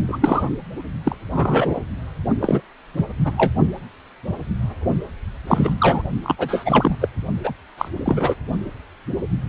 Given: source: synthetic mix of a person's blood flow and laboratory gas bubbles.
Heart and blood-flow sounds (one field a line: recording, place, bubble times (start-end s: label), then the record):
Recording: Doppler ultrasound of blood flow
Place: precordium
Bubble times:
0.00-0.02 s: bubbles
0.07-0.18 s: bubbles
0.21-0.49 s: bubbles
1.03-1.16 s: bubbles
1.30-1.81 s: bubbles
2.41-2.61 s: bubbles
2.98-3.06 s: bubbles
3.24-3.32 s: bubbles
3.37-3.52 s: bubbles
5.47-5.73 s: bubbles
5.78-6.02 s: bubbles
6.23-6.35 s: bubbles
6.38-6.96 s: bubbles
7.01-7.08 s: bubbles
7.43-7.53 s: bubbles
7.77-7.88 s: bubbles
8.05-8.34 s: bubbles
From the record:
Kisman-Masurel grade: 233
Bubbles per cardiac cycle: several, 3 to 8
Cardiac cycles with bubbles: 50 to 99%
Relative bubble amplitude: loud (0.450 to 0.775)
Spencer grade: 3 (all of the cardiac periods contain showers or single bubble signals, but not dominating or overriding the cardiac motion signals)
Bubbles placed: only in the low amplitude regions of the cardiac cycle